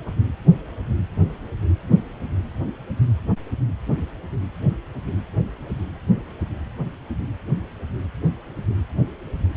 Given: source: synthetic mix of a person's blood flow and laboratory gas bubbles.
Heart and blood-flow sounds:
Doppler ultrasound of blood flow; precordium
no bubbles
From the record:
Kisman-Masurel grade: 000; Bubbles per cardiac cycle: 0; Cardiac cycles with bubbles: 0%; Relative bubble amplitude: no bubbles discernible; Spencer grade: 0 (complete lack of bubble signals)

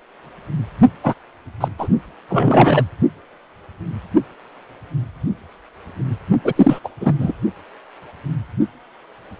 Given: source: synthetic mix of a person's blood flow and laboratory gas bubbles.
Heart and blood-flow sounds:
Doppler ultrasound of blood flow; precordium
1.03-1.14 s: bubbles
1.60-1.68 s: bubbles
1.79-1.89 s: bubbles
2.29-2.83 s: bubbles
6.45-6.53 s: bubbles
6.55-6.79 s: bubbles
6.84-6.89 s: bubbles
7.00-7.13 s: bubbles
7.19-7.33 s: bubbles
From the record:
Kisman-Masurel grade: 223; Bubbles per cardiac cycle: several, 3 to 8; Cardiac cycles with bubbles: 10 to 50%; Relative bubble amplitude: loud (0.450 to 0.775); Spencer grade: 2 (many but less than half of the cardiac periods contain bubble signals, singularly or in groups); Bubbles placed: only in the low amplitude regions of the cardiac cycle

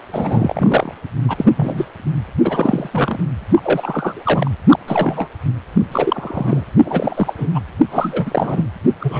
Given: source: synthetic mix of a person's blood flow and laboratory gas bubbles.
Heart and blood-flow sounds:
Doppler ultrasound of blood flow; precordium
0.12-0.94 s: bubbles
1.27-1.52 s: bubbles
1.56-1.85 s: bubbles
2.45-3.20 s: bubbles
3.56-4.22 s: bubbles
4.25-4.50 s: bubbles
4.67-4.79 s: bubbles
4.87-5.29 s: bubbles
5.92-6.65 s: bubbles
6.84-7.33 s: bubbles
7.37-7.50 s: bubbles
7.54-7.64 s: bubbles
7.91-8.67 s: bubbles
9.00-9.20 s: bubbles
From the record:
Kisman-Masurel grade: 343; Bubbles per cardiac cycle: rolling drumbeat, 9 or more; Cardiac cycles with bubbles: 100%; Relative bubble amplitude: loud (0.450 to 0.775); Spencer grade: 3 (all of the cardiac periods contain showers or single bubble signals, but not dominating or overriding the cardiac motion signals); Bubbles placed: anywhere in the cardiac cycle

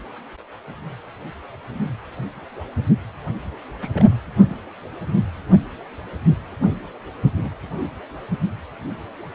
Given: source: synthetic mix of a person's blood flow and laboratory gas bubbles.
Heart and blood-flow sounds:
Doppler ultrasound of blood flow; precordium
3.81-3.90 s: bubbles
3.93-4.05 s: bubbles
4.45-4.57 s: bubbles
7.37-7.50 s: bubbles
From the record:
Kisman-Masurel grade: 121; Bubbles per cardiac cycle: 1 to 2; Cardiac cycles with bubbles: 10 to 50%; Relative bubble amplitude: barely perceptible (0.100 to 0.250); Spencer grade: 2 (many but less than half of the cardiac periods contain bubble signals, singularly or in groups); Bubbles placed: anywhere in the cardiac cycle

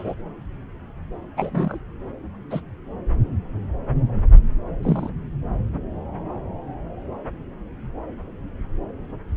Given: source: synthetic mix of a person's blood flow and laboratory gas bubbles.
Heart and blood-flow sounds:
Doppler ultrasound of blood flow; subclavian vein
0.00-0.15 s: bubbles
1.36-1.78 s: bubbles
2.50-2.60 s: bubbles
4.83-5.10 s: bubbles
From the record:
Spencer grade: 2 (many but less than half of the cardiac periods contain bubble signals, singularly or in groups); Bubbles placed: anywhere in the cardiac cycle

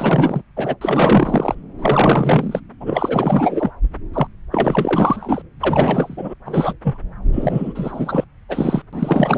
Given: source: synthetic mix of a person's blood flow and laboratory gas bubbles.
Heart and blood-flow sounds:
Doppler ultrasound of blood flow; subclavian vein
0.00-0.42 s: bubbles
0.56-0.75 s: bubbles
0.81-1.55 s: bubbles
1.78-2.60 s: bubbles
2.80-3.71 s: bubbles
4.13-4.27 s: bubbles
4.51-5.42 s: bubbles
5.59-6.33 s: bubbles
6.45-6.74 s: bubbles
6.83-6.97 s: bubbles
7.32-8.24 s: bubbles
8.48-8.82 s: bubbles
8.93-9.38 s: bubbles
From the record:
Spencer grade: 4 (maximum detectable bubble signal sounding continuously throughout systole and diastole of every cardiac period, and overriding the amplitude of the normal cardiac signals); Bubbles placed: anywhere in the cardiac cycle

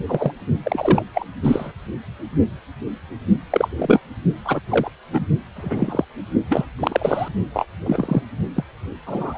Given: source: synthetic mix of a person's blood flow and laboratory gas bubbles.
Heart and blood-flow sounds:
Doppler ultrasound of blood flow; precordium
0.07-0.32 s: bubbles
0.63-1.02 s: bubbles
1.14-1.26 s: bubbles
1.43-1.72 s: bubbles
3.50-3.68 s: bubbles
3.76-4.00 s: bubbles
4.44-4.61 s: bubbles
4.69-4.90 s: bubbles
5.12-5.25 s: bubbles
5.55-6.04 s: bubbles
6.49-6.66 s: bubbles
6.79-7.29 s: bubbles
7.54-7.66 s: bubbles
7.86-8.23 s: bubbles
8.55-8.63 s: bubbles
9.06-9.38 s: bubbles
From the record:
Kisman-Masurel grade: 233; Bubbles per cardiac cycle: several, 3 to 8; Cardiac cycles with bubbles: 50 to 99%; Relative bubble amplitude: loud (0.450 to 0.775); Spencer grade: 3 (all of the cardiac periods contain showers or single bubble signals, but not dominating or overriding the cardiac motion signals); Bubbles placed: only in the low amplitude regions of the cardiac cycle

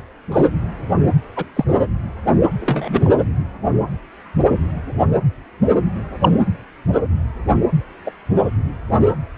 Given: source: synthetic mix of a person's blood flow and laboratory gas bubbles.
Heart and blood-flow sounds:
Doppler ultrasound of blood flow; precordium
0.32-0.48 s: bubbles
1.36-1.46 s: bubbles
1.55-1.65 s: bubbles
2.60-3.09 s: bubbles
6.22-6.31 s: bubbles
8.06-8.11 s: bubbles
From the record:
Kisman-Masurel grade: 123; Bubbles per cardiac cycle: 1 to 2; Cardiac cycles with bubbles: 10 to 50%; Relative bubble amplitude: loud (0.450 to 0.775); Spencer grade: 2 (many but less than half of the cardiac periods contain bubble signals, singularly or in groups); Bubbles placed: anywhere in the cardiac cycle

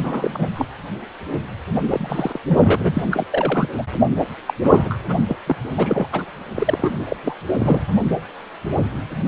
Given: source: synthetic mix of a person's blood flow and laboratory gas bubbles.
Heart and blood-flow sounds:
Doppler ultrasound of blood flow; precordium
0.00-0.49 s: bubbles
0.54-0.67 s: bubbles
1.82-2.38 s: bubbles
2.49-3.03 s: bubbles
3.11-3.26 s: bubbles
3.32-3.69 s: bubbles
3.77-3.84 s: bubbles
4.46-4.54 s: bubbles
4.63-4.96 s: bubbles
5.07-5.18 s: bubbles
5.27-5.36 s: bubbles
5.46-5.56 s: bubbles
5.77-6.07 s: bubbles
6.12-6.25 s: bubbles
6.56-6.92 s: bubbles
7.09-7.16 s: bubbles
7.23-7.34 s: bubbles
7.57-7.86 s: bubbles
9.26-9.28 s: bubbles
From the record:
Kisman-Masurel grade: 332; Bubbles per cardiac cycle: rolling drumbeat, 9 or more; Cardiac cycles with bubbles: 50 to 99%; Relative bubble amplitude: moderate (0.250 to 0.450); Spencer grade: 3 (all of the cardiac periods contain showers or single bubble signals, but not dominating or overriding the cardiac motion signals); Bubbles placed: anywhere in the cardiac cycle

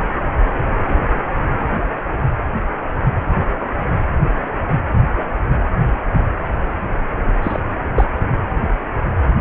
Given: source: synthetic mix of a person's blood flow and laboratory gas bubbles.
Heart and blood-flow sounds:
Doppler ultrasound of blood flow; precordium
7.33-7.39 s: bubbles
7.42-7.59 s: bubbles
7.95-8.07 s: bubbles
From the record:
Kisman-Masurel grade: 212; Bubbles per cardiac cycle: several, 3 to 8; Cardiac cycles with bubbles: 1 to 10%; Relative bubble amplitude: moderate (0.250 to 0.450); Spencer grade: 1 (occasional bubble signal discernible with the cardiac motion signal, with majority of cardiac periods free of bubbles); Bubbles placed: anywhere in the cardiac cycle

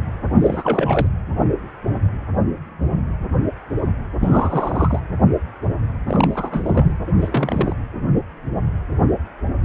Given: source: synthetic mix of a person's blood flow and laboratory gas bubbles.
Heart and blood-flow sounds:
Doppler ultrasound of blood flow; precordium
0.34-1.07 s: bubbles
4.20-5.00 s: bubbles
6.07-6.98 s: bubbles
7.06-7.12 s: bubbles
7.17-7.75 s: bubbles
From the record:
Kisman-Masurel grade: 222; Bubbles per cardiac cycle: several, 3 to 8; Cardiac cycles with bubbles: 10 to 50%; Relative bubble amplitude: moderate (0.250 to 0.450); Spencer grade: 2 (many but less than half of the cardiac periods contain bubble signals, singularly or in groups); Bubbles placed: anywhere in the cardiac cycle

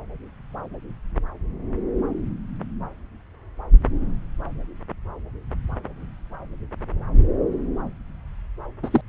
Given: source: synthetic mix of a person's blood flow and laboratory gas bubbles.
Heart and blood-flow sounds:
Doppler ultrasound of blood flow; subclavian vein
8.83-9.01 s: bubbles
From the record:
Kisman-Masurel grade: 112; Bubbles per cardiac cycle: 1 to 2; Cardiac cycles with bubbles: 1 to 10%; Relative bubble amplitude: moderate (0.250 to 0.450); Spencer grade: 1 (occasional bubble signal discernible with the cardiac motion signal, with majority of cardiac periods free of bubbles); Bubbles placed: anywhere in the cardiac cycle

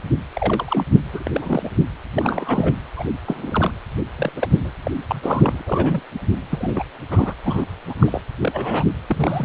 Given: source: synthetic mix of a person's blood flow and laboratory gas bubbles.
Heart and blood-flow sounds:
Doppler ultrasound of blood flow; precordium
0.35-0.85 s: bubbles
1.12-1.23 s: bubbles
1.26-1.30 s: bubbles
1.33-1.69 s: bubbles
2.15-2.74 s: bubbles
2.96-3.05 s: bubbles
3.25-3.71 s: bubbles
4.17-4.33 s: bubbles
4.36-4.47 s: bubbles
4.60-4.70 s: bubbles
4.85-4.91 s: bubbles
5.07-5.62 s: bubbles
5.64-6.01 s: bubbles
6.50-6.83 s: bubbles
7.11-7.34 s: bubbles
7.44-7.65 s: bubbles
7.89-7.95 s: bubbles
7.99-8.21 s: bubbles
8.38-8.85 s: bubbles
9.07-9.45 s: bubbles
From the record:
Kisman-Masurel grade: 232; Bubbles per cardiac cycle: several, 3 to 8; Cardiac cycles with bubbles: 50 to 99%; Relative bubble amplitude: moderate (0.250 to 0.450); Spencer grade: 3 (all of the cardiac periods contain showers or single bubble signals, but not dominating or overriding the cardiac motion signals); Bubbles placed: anywhere in the cardiac cycle

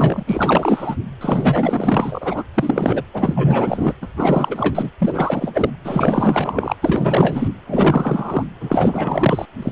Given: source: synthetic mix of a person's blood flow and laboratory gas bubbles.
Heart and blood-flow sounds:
Doppler ultrasound of blood flow; precordium
0.00-0.23 s: bubbles
0.27-0.96 s: bubbles
1.21-2.43 s: bubbles
2.54-3.02 s: bubbles
3.13-3.94 s: bubbles
4.01-4.08 s: bubbles
4.17-4.90 s: bubbles
4.99-5.73 s: bubbles
5.84-6.75 s: bubbles
6.81-7.49 s: bubbles
7.67-8.45 s: bubbles
8.60-9.46 s: bubbles
9.62-9.72 s: bubbles
From the record:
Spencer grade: 4 (maximum detectable bubble signal sounding continuously throughout systole and diastole of every cardiac period, and overriding the amplitude of the normal cardiac signals); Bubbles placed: anywhere in the cardiac cycle

